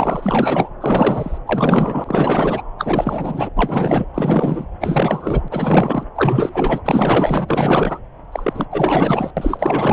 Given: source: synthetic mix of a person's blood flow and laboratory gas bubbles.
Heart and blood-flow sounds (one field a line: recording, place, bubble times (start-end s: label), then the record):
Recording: Doppler ultrasound of blood flow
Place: subclavian vein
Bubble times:
0.00-0.68 s: bubbles
0.80-1.38 s: bubbles
1.47-2.62 s: bubbles
2.78-3.50 s: bubbles
3.56-4.08 s: bubbles
4.14-4.67 s: bubbles
4.80-6.05 s: bubbles
6.15-6.81 s: bubbles
6.84-8.00 s: bubbles
8.32-8.65 s: bubbles
8.71-9.31 s: bubbles
9.37-9.93 s: bubbles
From the record:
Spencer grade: 4 (maximum detectable bubble signal sounding continuously throughout systole and diastole of every cardiac period, and overriding the amplitude of the normal cardiac signals)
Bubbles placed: anywhere in the cardiac cycle